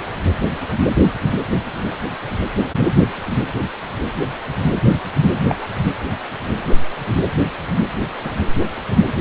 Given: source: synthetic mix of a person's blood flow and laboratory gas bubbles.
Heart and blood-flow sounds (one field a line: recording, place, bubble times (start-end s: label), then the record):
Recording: Doppler ultrasound of blood flow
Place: precordium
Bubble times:
2.79-2.88 s: bubbles
5.48-5.55 s: bubbles
5.61-5.67 s: bubbles
8.24-8.32 s: bubbles
From the record:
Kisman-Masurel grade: 122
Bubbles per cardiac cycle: 1 to 2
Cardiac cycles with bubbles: 10 to 50%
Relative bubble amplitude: moderate (0.250 to 0.450)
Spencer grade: 2 (many but less than half of the cardiac periods contain bubble signals, singularly or in groups)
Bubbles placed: anywhere in the cardiac cycle